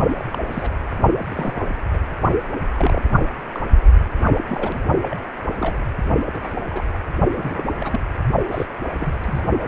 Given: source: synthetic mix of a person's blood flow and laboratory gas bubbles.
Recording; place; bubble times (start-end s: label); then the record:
Doppler ultrasound of blood flow; precordium
0.17-0.24 s: bubbles
0.32-0.40 s: bubbles
0.51-0.70 s: bubbles
1.23-1.65 s: bubbles
1.93-1.98 s: bubbles
2.75-3.19 s: bubbles
3.52-3.67 s: bubbles
4.37-4.78 s: bubbles
5.02-5.16 s: bubbles
5.59-5.76 s: bubbles
6.34-6.54 s: bubbles
6.71-6.85 s: bubbles
6.93-7.00 s: bubbles
7.32-7.63 s: bubbles
7.79-8.00 s: bubbles
8.50-8.67 s: bubbles
8.79-9.44 s: bubbles
From the record:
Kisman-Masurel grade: 242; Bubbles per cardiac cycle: several, 3 to 8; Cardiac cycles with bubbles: 100%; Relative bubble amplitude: moderate (0.250 to 0.450); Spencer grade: 3 (all of the cardiac periods contain showers or single bubble signals, but not dominating or overriding the cardiac motion signals); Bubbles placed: only in the low amplitude regions of the cardiac cycle